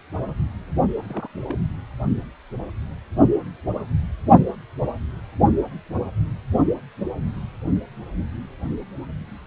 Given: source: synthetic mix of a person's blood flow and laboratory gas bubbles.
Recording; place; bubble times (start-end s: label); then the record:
Doppler ultrasound of blood flow; precordium
0.97-1.30 s: bubbles
1.49-1.55 s: bubbles
From the record:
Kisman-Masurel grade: 211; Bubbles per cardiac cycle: several, 3 to 8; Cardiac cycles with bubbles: 1 to 10%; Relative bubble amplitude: barely perceptible (0.100 to 0.250); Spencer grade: 1 (occasional bubble signal discernible with the cardiac motion signal, with majority of cardiac periods free of bubbles); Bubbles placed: only in the low amplitude regions of the cardiac cycle